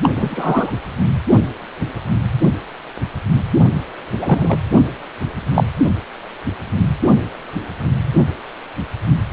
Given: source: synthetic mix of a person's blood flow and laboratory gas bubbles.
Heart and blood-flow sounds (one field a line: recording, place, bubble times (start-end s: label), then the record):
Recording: Doppler ultrasound of blood flow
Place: precordium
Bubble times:
0.02-0.10 s: bubbles
0.15-0.71 s: bubbles
4.19-4.59 s: bubbles
5.54-5.64 s: bubbles
From the record:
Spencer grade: 2 (many but less than half of the cardiac periods contain bubble signals, singularly or in groups)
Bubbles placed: anywhere in the cardiac cycle